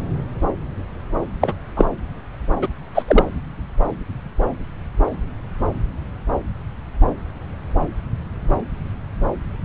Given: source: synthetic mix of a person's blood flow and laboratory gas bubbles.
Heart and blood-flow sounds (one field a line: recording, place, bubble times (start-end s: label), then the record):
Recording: Doppler ultrasound of blood flow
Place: subclavian vein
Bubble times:
1.41-1.54 s: bubbles
1.76-1.85 s: bubbles
2.62-2.68 s: bubbles
2.94-3.03 s: bubbles
3.07-3.25 s: bubbles
From the record:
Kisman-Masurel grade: 223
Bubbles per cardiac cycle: several, 3 to 8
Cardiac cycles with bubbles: 10 to 50%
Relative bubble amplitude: loud (0.450 to 0.775)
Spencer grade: 2 (many but less than half of the cardiac periods contain bubble signals, singularly or in groups)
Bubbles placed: anywhere in the cardiac cycle